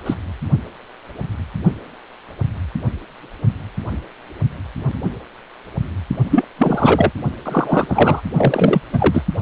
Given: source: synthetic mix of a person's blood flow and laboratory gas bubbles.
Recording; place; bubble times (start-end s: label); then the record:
Doppler ultrasound of blood flow; precordium
0.06-0.14 s: bubbles
6.30-6.45 s: bubbles
6.58-7.11 s: bubbles
7.45-8.21 s: bubbles
8.36-8.81 s: bubbles
8.93-9.22 s: bubbles
From the record:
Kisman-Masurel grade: 223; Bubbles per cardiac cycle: several, 3 to 8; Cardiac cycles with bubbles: 10 to 50%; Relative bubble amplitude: loud (0.450 to 0.775); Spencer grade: 2 (many but less than half of the cardiac periods contain bubble signals, singularly or in groups); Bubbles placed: only in the low amplitude regions of the cardiac cycle